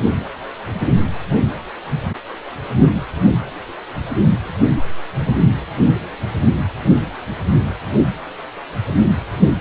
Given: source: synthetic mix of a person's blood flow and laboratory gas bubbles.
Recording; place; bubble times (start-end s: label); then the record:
Doppler ultrasound of blood flow; precordium
no bubbles
From the record:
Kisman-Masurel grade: 000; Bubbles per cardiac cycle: 0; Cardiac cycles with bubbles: 0%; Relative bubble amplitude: no bubbles discernible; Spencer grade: 0 (complete lack of bubble signals)